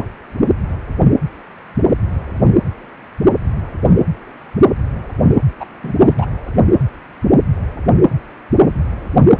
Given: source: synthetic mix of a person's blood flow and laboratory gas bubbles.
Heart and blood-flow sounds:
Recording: Doppler ultrasound of blood flow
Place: precordium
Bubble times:
5.59-5.66 s: bubbles
5.83-5.92 s: bubbles
5.99-6.14 s: bubbles
6.18-6.26 s: bubbles
From the record:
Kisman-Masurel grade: 213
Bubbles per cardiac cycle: several, 3 to 8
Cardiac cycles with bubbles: 1 to 10%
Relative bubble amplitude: loud (0.450 to 0.775)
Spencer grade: 1 (occasional bubble signal discernible with the cardiac motion signal, with majority of cardiac periods free of bubbles)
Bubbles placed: anywhere in the cardiac cycle

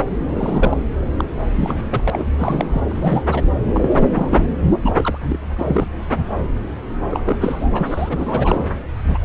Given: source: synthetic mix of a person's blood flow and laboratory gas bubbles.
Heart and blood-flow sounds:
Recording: Doppler ultrasound of blood flow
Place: subclavian vein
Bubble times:
0.28-0.82 s: bubbles
1.17-1.25 s: bubbles
1.48-1.87 s: bubbles
1.90-2.10 s: bubbles
2.12-2.25 s: bubbles
2.38-2.82 s: bubbles
2.90-3.23 s: bubbles
3.31-3.43 s: bubbles
3.73-4.45 s: bubbles
4.82-5.18 s: bubbles
5.22-5.38 s: bubbles
5.56-5.87 s: bubbles
7.11-7.38 s: bubbles
7.40-8.63 s: bubbles
9.04-9.18 s: bubbles
From the record:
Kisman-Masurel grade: 332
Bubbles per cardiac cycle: rolling drumbeat, 9 or more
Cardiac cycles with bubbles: 50 to 99%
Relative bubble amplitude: moderate (0.250 to 0.450)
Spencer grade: 3 (all of the cardiac periods contain showers or single bubble signals, but not dominating or overriding the cardiac motion signals)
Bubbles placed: anywhere in the cardiac cycle

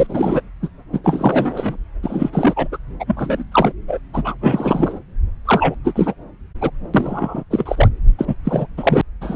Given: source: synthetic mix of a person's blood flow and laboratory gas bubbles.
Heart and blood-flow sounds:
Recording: Doppler ultrasound of blood flow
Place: subclavian vein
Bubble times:
0.00-0.07 s: bubbles
0.09-0.42 s: bubbles
0.62-0.68 s: bubbles
0.93-1.00 s: bubbles
1.03-1.77 s: bubbles
2.03-2.30 s: bubbles
2.33-2.67 s: bubbles
2.71-2.78 s: bubbles
3.00-3.43 s: bubbles
3.51-3.72 s: bubbles
3.88-3.99 s: bubbles
4.13-4.34 s: bubbles
4.41-5.00 s: bubbles
5.45-5.75 s: bubbles
5.83-5.93 s: bubbles
5.96-6.14 s: bubbles
6.61-6.70 s: bubbles
6.93-7.43 s: bubbles
7.50-7.88 s: bubbles
8.18-8.35 s: bubbles
8.45-8.66 s: bubbles
8.77-9.02 s: bubbles
9.21-9.36 s: bubbles
From the record:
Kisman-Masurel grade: 343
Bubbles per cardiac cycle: rolling drumbeat, 9 or more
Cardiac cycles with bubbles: 100%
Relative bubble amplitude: loud (0.450 to 0.775)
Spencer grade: 3 (all of the cardiac periods contain showers or single bubble signals, but not dominating or overriding the cardiac motion signals)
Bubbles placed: anywhere in the cardiac cycle

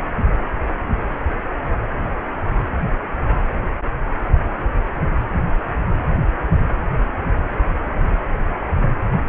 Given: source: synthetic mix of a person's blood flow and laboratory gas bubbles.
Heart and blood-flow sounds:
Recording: Doppler ultrasound of blood flow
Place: precordium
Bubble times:
no bubbles
From the record:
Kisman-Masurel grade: 000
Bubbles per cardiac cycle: 0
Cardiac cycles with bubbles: 0%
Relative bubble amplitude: no bubbles discernible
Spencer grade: 0 (complete lack of bubble signals)

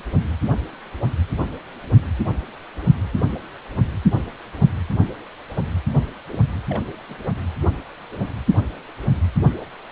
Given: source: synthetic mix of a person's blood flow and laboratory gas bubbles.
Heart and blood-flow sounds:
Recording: Doppler ultrasound of blood flow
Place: precordium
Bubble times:
6.30-6.40 s: bubbles
6.69-6.83 s: bubbles
7.09-7.25 s: bubbles
From the record:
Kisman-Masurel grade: 211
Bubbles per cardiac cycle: several, 3 to 8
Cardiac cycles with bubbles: 1 to 10%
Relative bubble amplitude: barely perceptible (0.100 to 0.250)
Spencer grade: 1 (occasional bubble signal discernible with the cardiac motion signal, with majority of cardiac periods free of bubbles)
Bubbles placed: only in the low amplitude regions of the cardiac cycle

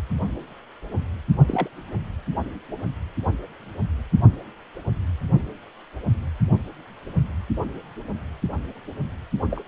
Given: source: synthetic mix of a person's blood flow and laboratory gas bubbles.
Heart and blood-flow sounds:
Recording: Doppler ultrasound of blood flow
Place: precordium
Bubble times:
1.47-1.69 s: bubbles
9.51-9.62 s: bubbles
From the record:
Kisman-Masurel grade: 121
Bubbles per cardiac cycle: 1 to 2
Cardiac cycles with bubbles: 10 to 50%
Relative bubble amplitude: barely perceptible (0.100 to 0.250)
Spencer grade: 2 (many but less than half of the cardiac periods contain bubble signals, singularly or in groups)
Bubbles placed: only in the low amplitude regions of the cardiac cycle

